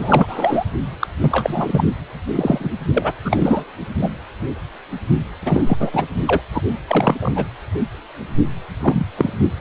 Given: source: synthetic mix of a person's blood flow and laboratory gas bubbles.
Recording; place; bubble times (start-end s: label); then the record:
Doppler ultrasound of blood flow; precordium
0.00-0.64 s: bubbles
1.00-1.07 s: bubbles
1.20-1.84 s: bubbles
2.35-2.69 s: bubbles
2.93-3.12 s: bubbles
3.24-3.64 s: bubbles
3.94-4.10 s: bubbles
5.43-5.90 s: bubbles
5.92-6.05 s: bubbles
6.25-6.41 s: bubbles
6.54-6.62 s: bubbles
6.87-7.32 s: bubbles
7.36-7.46 s: bubbles
8.82-9.06 s: bubbles
9.17-9.32 s: bubbles
From the record:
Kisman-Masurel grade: 233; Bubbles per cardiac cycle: several, 3 to 8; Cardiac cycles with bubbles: 50 to 99%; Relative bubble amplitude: loud (0.450 to 0.775); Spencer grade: 3 (all of the cardiac periods contain showers or single bubble signals, but not dominating or overriding the cardiac motion signals); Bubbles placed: anywhere in the cardiac cycle